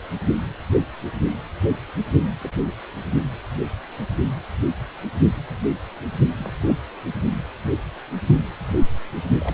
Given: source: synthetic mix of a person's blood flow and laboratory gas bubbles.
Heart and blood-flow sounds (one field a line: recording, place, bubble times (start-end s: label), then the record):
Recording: Doppler ultrasound of blood flow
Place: precordium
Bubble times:
2.41-2.51 s: bubbles
2.58-2.62 s: bubbles
6.37-6.52 s: bubbles
6.66-6.75 s: bubbles
9.40-9.54 s: bubbles
From the record:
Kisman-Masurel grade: 121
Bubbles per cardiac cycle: 1 to 2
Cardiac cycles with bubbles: 10 to 50%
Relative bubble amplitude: barely perceptible (0.100 to 0.250)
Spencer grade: 2 (many but less than half of the cardiac periods contain bubble signals, singularly or in groups)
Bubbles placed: only in the low amplitude regions of the cardiac cycle